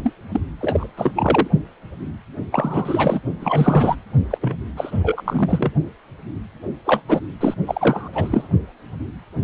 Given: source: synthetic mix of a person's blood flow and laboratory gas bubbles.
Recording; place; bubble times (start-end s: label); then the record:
Doppler ultrasound of blood flow; precordium
0.03-0.14 s: bubbles
0.31-0.41 s: bubbles
0.60-0.87 s: bubbles
0.96-1.12 s: bubbles
1.15-1.48 s: bubbles
2.52-3.21 s: bubbles
3.41-3.96 s: bubbles
4.30-4.38 s: bubbles
4.41-4.55 s: bubbles
4.76-5.71 s: bubbles
6.84-7.02 s: bubbles
7.08-7.21 s: bubbles
7.40-7.54 s: bubbles
7.66-8.08 s: bubbles
8.12-8.48 s: bubbles
From the record:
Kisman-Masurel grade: 333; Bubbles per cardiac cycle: rolling drumbeat, 9 or more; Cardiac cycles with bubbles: 50 to 99%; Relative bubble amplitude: loud (0.450 to 0.775); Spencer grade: 3 (all of the cardiac periods contain showers or single bubble signals, but not dominating or overriding the cardiac motion signals); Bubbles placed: only in the low amplitude regions of the cardiac cycle